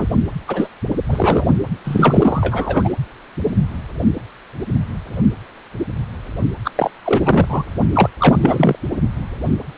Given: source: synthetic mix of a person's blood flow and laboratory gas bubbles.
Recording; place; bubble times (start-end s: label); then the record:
Doppler ultrasound of blood flow; precordium
0.00-0.06 s: bubbles
0.48-0.69 s: bubbles
1.08-1.45 s: bubbles
1.84-2.89 s: bubbles
6.64-6.71 s: bubbles
6.76-6.90 s: bubbles
7.04-7.46 s: bubbles
7.48-7.65 s: bubbles
7.93-8.09 s: bubbles
8.20-8.37 s: bubbles
8.41-8.76 s: bubbles
From the record:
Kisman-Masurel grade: 333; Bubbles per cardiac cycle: rolling drumbeat, 9 or more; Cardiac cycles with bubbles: 50 to 99%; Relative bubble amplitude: loud (0.450 to 0.775); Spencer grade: 3 (all of the cardiac periods contain showers or single bubble signals, but not dominating or overriding the cardiac motion signals); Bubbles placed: only in the low amplitude regions of the cardiac cycle